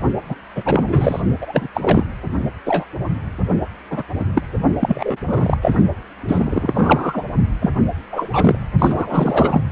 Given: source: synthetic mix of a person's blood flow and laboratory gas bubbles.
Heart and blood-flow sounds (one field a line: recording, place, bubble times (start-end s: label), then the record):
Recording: Doppler ultrasound of blood flow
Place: precordium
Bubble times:
0.28-0.35 s: bubbles
0.55-1.22 s: bubbles
1.41-1.67 s: bubbles
1.74-2.06 s: bubbles
2.65-2.84 s: bubbles
3.90-4.03 s: bubbles
4.19-4.25 s: bubbles
4.34-4.42 s: bubbles
4.80-5.17 s: bubbles
5.26-5.58 s: bubbles
5.61-5.76 s: bubbles
6.28-7.24 s: bubbles
7.62-7.71 s: bubbles
8.12-8.30 s: bubbles
8.32-8.56 s: bubbles
8.79-9.61 s: bubbles
From the record:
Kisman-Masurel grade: 243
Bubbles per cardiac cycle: several, 3 to 8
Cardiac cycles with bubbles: 100%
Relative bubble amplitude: loud (0.450 to 0.775)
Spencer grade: 3 (all of the cardiac periods contain showers or single bubble signals, but not dominating or overriding the cardiac motion signals)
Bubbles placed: only in the low amplitude regions of the cardiac cycle